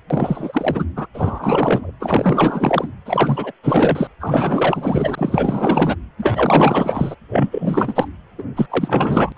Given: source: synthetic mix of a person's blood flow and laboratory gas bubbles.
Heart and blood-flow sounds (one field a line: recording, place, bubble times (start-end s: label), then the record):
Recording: Doppler ultrasound of blood flow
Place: precordium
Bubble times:
0.10-0.85 s: bubbles
0.96-1.06 s: bubbles
1.14-1.92 s: bubbles
2.00-2.88 s: bubbles
3.05-3.52 s: bubbles
3.63-4.07 s: bubbles
4.20-5.96 s: bubbles
6.17-7.15 s: bubbles
7.29-8.08 s: bubbles
8.38-8.43 s: bubbles
8.55-8.66 s: bubbles
8.70-9.32 s: bubbles
9.36-9.38 s: bubbles
From the record:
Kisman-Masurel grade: 444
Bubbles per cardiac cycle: continuous sound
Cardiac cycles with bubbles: 100%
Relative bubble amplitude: maximal (0.775 to 0.999)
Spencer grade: 4 (maximum detectable bubble signal sounding continuously throughout systole and diastole of every cardiac period, and overriding the amplitude of the normal cardiac signals)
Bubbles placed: anywhere in the cardiac cycle